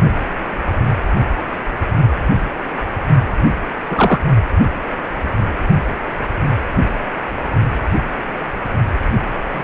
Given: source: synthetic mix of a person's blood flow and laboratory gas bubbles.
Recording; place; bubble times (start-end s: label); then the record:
Doppler ultrasound of blood flow; precordium
3.86-4.21 s: bubbles
9.48-9.64 s: bubbles
From the record:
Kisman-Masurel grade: 123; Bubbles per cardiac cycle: 1 to 2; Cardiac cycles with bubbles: 10 to 50%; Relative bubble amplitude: loud (0.450 to 0.775); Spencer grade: 2 (many but less than half of the cardiac periods contain bubble signals, singularly or in groups); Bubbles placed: only in the low amplitude regions of the cardiac cycle